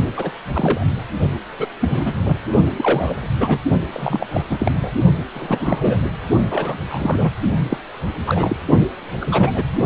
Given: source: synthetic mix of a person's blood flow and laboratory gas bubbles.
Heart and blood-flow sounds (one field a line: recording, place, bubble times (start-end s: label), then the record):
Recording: Doppler ultrasound of blood flow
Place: precordium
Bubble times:
0.17-0.32 s: bubbles
0.53-0.86 s: bubbles
1.58-1.67 s: bubbles
1.81-2.13 s: bubbles
2.23-2.37 s: bubbles
2.76-3.29 s: bubbles
3.40-3.58 s: bubbles
3.92-4.27 s: bubbles
4.30-4.43 s: bubbles
4.50-4.91 s: bubbles
5.35-6.00 s: bubbles
6.50-6.84 s: bubbles
6.90-7.32 s: bubbles
7.70-7.78 s: bubbles
8.26-8.56 s: bubbles
9.21-9.63 s: bubbles
From the record:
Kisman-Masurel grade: 242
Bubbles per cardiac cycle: several, 3 to 8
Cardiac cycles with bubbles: 100%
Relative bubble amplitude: moderate (0.250 to 0.450)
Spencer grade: 3 (all of the cardiac periods contain showers or single bubble signals, but not dominating or overriding the cardiac motion signals)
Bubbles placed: only in the low amplitude regions of the cardiac cycle